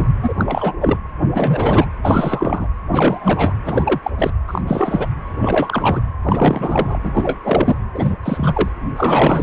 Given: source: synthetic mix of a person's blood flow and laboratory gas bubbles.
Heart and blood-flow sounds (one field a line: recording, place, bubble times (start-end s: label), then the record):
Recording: Doppler ultrasound of blood flow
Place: precordium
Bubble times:
0.00-0.07 s: bubbles
0.22-0.33 s: bubbles
0.38-0.75 s: bubbles
0.80-0.97 s: bubbles
1.35-1.86 s: bubbles
2.02-2.69 s: bubbles
2.90-3.53 s: bubbles
3.66-4.00 s: bubbles
4.03-4.11 s: bubbles
4.18-4.31 s: bubbles
4.48-4.62 s: bubbles
4.67-5.07 s: bubbles
5.41-6.00 s: bubbles
6.23-7.00 s: bubbles
7.04-7.39 s: bubbles
7.44-7.76 s: bubbles
7.93-8.18 s: bubbles
8.23-8.69 s: bubbles
8.96-9.43 s: bubbles
From the record:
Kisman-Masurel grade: 343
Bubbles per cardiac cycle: rolling drumbeat, 9 or more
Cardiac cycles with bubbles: 100%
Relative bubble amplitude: loud (0.450 to 0.775)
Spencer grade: 3 (all of the cardiac periods contain showers or single bubble signals, but not dominating or overriding the cardiac motion signals)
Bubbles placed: anywhere in the cardiac cycle